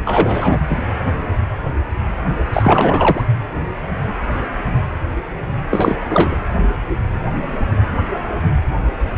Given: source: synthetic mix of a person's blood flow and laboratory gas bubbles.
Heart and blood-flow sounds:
Doppler ultrasound of blood flow; precordium
0.05-0.58 s: bubbles
0.70-0.75 s: bubbles
2.53-3.24 s: bubbles
5.71-5.96 s: bubbles
6.09-6.36 s: bubbles
From the record:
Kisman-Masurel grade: 223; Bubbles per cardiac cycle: several, 3 to 8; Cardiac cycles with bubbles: 10 to 50%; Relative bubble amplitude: loud (0.450 to 0.775); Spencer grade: 2 (many but less than half of the cardiac periods contain bubble signals, singularly or in groups); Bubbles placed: anywhere in the cardiac cycle

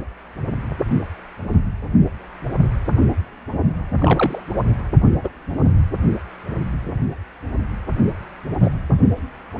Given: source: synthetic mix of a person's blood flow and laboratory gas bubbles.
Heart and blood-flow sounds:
Doppler ultrasound of blood flow; precordium
3.98-4.42 s: bubbles
5.23-5.29 s: bubbles
8.62-8.70 s: bubbles
From the record:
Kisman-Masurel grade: 123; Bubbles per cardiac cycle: 1 to 2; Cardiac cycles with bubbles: 10 to 50%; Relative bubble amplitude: loud (0.450 to 0.775); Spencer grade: 2 (many but less than half of the cardiac periods contain bubble signals, singularly or in groups); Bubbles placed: only in the low amplitude regions of the cardiac cycle

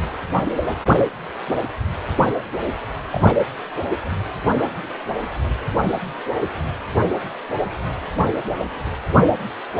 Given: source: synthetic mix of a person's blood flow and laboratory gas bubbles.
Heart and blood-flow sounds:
Doppler ultrasound of blood flow; precordium
3.12-3.23 s: bubbles
3.27-3.35 s: bubbles
From the record:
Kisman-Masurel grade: 112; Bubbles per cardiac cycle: 1 to 2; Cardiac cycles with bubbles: 1 to 10%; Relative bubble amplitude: moderate (0.250 to 0.450); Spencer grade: 1 (occasional bubble signal discernible with the cardiac motion signal, with majority of cardiac periods free of bubbles); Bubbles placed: anywhere in the cardiac cycle

